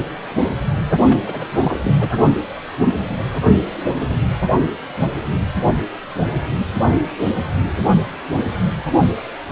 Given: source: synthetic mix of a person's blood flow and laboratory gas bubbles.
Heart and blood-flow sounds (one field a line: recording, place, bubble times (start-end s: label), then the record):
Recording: Doppler ultrasound of blood flow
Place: precordium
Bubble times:
1.07-1.17 s: bubbles
1.26-1.45 s: bubbles
1.61-1.80 s: bubbles
1.84-1.95 s: bubbles
1.99-2.08 s: bubbles
From the record:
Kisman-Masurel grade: 212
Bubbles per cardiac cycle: several, 3 to 8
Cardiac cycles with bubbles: 1 to 10%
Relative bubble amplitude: moderate (0.250 to 0.450)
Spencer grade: 1 (occasional bubble signal discernible with the cardiac motion signal, with majority of cardiac periods free of bubbles)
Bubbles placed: anywhere in the cardiac cycle